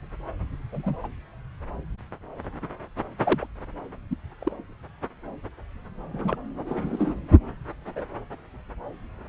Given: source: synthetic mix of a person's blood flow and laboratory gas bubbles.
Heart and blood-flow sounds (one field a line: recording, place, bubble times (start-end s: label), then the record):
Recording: Doppler ultrasound of blood flow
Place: subclavian vein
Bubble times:
0.72-0.95 s: bubbles
1.03-1.07 s: bubbles
3.19-3.46 s: bubbles
4.10-4.16 s: bubbles
4.41-4.54 s: bubbles
6.13-6.38 s: bubbles
6.67-7.15 s: bubbles
7.83-8.05 s: bubbles
From the record:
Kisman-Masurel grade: 121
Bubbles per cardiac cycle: 1 to 2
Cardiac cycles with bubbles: 10 to 50%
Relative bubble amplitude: barely perceptible (0.100 to 0.250)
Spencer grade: 2 (many but less than half of the cardiac periods contain bubble signals, singularly or in groups)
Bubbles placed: anywhere in the cardiac cycle